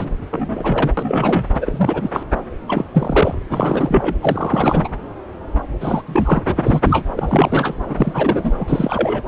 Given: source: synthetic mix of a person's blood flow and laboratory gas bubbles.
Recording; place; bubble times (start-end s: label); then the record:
Doppler ultrasound of blood flow; subclavian vein
0.00-0.11 s: bubbles
0.30-0.93 s: bubbles
0.97-1.48 s: bubbles
1.54-2.10 s: bubbles
2.13-2.23 s: bubbles
2.67-2.84 s: bubbles
2.92-3.35 s: bubbles
3.40-3.43 s: bubbles
3.49-4.15 s: bubbles
4.21-4.88 s: bubbles
5.80-6.02 s: bubbles
6.07-6.42 s: bubbles
6.46-6.80 s: bubbles
6.84-7.06 s: bubbles
7.17-7.75 s: bubbles
7.87-8.52 s: bubbles
8.59-9.23 s: bubbles
From the record:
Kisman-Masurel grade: 332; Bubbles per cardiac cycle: rolling drumbeat, 9 or more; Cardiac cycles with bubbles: 50 to 99%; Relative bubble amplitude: moderate (0.250 to 0.450); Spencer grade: 3 (all of the cardiac periods contain showers or single bubble signals, but not dominating or overriding the cardiac motion signals); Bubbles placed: anywhere in the cardiac cycle